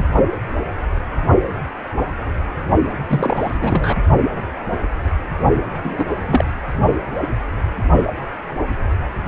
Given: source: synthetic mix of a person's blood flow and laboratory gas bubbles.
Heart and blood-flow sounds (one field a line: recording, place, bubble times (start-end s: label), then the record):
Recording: Doppler ultrasound of blood flow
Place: precordium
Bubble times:
2.85-2.93 s: bubbles
3.08-3.98 s: bubbles
5.83-6.12 s: bubbles
6.28-6.45 s: bubbles
From the record:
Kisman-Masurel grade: 222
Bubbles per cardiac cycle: several, 3 to 8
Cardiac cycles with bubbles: 10 to 50%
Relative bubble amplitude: moderate (0.250 to 0.450)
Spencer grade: 2 (many but less than half of the cardiac periods contain bubble signals, singularly or in groups)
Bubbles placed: only in the low amplitude regions of the cardiac cycle